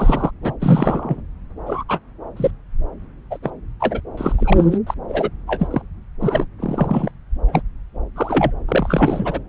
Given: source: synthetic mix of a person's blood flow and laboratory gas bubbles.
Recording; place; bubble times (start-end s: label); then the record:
Doppler ultrasound of blood flow; subclavian vein
0.00-0.31 s: bubbles
0.42-0.53 s: bubbles
0.59-1.21 s: bubbles
1.66-1.83 s: bubbles
1.88-2.00 s: bubbles
2.37-2.50 s: bubbles
3.31-3.38 s: bubbles
3.42-3.50 s: bubbles
3.80-4.00 s: bubbles
4.17-4.33 s: bubbles
4.35-4.78 s: bubbles
4.87-4.95 s: bubbles
5.08-5.30 s: bubbles
5.47-5.68 s: bubbles
5.71-5.82 s: bubbles
6.20-6.46 s: bubbles
6.59-7.12 s: bubbles
7.47-7.62 s: bubbles
8.16-8.51 s: bubbles
8.68-9.40 s: bubbles
From the record:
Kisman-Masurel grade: 233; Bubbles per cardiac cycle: several, 3 to 8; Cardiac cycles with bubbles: 50 to 99%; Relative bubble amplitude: loud (0.450 to 0.775); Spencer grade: 3 (all of the cardiac periods contain showers or single bubble signals, but not dominating or overriding the cardiac motion signals); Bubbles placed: anywhere in the cardiac cycle